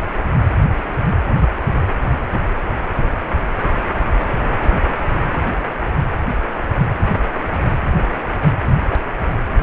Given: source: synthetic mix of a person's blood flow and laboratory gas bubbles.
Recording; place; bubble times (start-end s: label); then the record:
Doppler ultrasound of blood flow; precordium
no bubbles
From the record:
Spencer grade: 0 (complete lack of bubble signals)